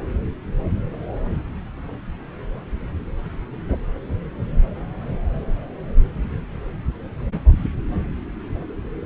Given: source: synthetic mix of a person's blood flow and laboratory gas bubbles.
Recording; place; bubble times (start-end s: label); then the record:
Doppler ultrasound of blood flow; subclavian vein
3.69-3.77 s: bubbles
From the record:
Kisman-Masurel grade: 111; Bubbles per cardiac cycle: 1 to 2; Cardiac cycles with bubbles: 1 to 10%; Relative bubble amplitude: barely perceptible (0.100 to 0.250); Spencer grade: 1 (occasional bubble signal discernible with the cardiac motion signal, with majority of cardiac periods free of bubbles); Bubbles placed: anywhere in the cardiac cycle